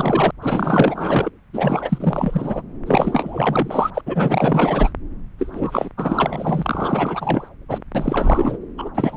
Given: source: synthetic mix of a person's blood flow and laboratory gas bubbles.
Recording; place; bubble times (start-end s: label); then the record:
Doppler ultrasound of blood flow; subclavian vein
0.00-0.31 s: bubbles
0.42-1.31 s: bubbles
1.52-2.62 s: bubbles
2.86-3.90 s: bubbles
3.94-4.01 s: bubbles
4.05-4.92 s: bubbles
5.38-5.89 s: bubbles
5.97-7.50 s: bubbles
7.68-7.81 s: bubbles
7.94-8.58 s: bubbles
8.78-8.88 s: bubbles
8.95-9.17 s: bubbles
From the record:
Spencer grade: 4 (maximum detectable bubble signal sounding continuously throughout systole and diastole of every cardiac period, and overriding the amplitude of the normal cardiac signals); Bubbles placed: anywhere in the cardiac cycle